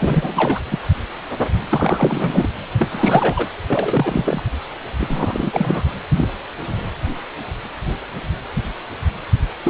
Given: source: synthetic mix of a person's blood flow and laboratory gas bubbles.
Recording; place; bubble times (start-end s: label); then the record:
Doppler ultrasound of blood flow; precordium
0.00-0.62 s: bubbles
0.71-0.79 s: bubbles
1.70-2.47 s: bubbles
2.79-3.46 s: bubbles
3.70-4.43 s: bubbles
4.98-5.84 s: bubbles
6.11-6.26 s: bubbles
9.63-9.70 s: bubbles
From the record:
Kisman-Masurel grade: 333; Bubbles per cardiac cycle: rolling drumbeat, 9 or more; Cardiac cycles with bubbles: 50 to 99%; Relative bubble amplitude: loud (0.450 to 0.775); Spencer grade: 3 (all of the cardiac periods contain showers or single bubble signals, but not dominating or overriding the cardiac motion signals); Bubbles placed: anywhere in the cardiac cycle